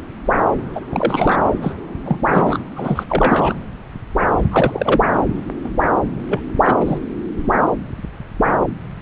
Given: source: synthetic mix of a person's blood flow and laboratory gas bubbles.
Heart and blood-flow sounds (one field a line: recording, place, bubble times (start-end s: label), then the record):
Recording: Doppler ultrasound of blood flow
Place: subclavian vein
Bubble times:
0.75-0.81 s: bubbles
0.90-1.37 s: bubbles
1.62-1.73 s: bubbles
2.04-2.19 s: bubbles
2.24-2.58 s: bubbles
2.76-3.04 s: bubbles
3.10-3.54 s: bubbles
4.51-5.00 s: bubbles
5.63-5.70 s: bubbles
6.28-6.39 s: bubbles
6.64-6.74 s: bubbles
6.80-6.98 s: bubbles
From the record:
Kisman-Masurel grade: 223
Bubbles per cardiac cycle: several, 3 to 8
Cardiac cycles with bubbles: 10 to 50%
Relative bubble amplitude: loud (0.450 to 0.775)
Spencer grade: 2 (many but less than half of the cardiac periods contain bubble signals, singularly or in groups)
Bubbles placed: anywhere in the cardiac cycle